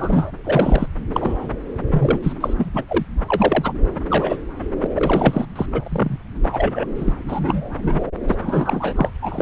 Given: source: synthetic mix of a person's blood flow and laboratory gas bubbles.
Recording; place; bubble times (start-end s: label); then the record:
Doppler ultrasound of blood flow; subclavian vein
0.00-0.31 s: bubbles
0.44-0.86 s: bubbles
1.12-1.49 s: bubbles
1.91-2.19 s: bubbles
2.22-2.33 s: bubbles
2.40-2.53 s: bubbles
2.57-2.70 s: bubbles
2.73-2.83 s: bubbles
2.88-3.04 s: bubbles
3.28-3.73 s: bubbles
4.10-4.37 s: bubbles
4.81-4.87 s: bubbles
4.95-5.46 s: bubbles
5.55-5.66 s: bubbles
5.72-5.81 s: bubbles
5.84-6.17 s: bubbles
6.42-6.86 s: bubbles
6.98-7.13 s: bubbles
7.27-7.70 s: bubbles
7.83-8.04 s: bubbles
8.28-8.36 s: bubbles
8.40-8.93 s: bubbles
8.96-9.10 s: bubbles
9.22-9.42 s: bubbles
From the record:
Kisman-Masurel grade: 243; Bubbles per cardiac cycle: several, 3 to 8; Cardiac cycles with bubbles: 100%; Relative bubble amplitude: loud (0.450 to 0.775); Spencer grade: 3 (all of the cardiac periods contain showers or single bubble signals, but not dominating or overriding the cardiac motion signals); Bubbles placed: anywhere in the cardiac cycle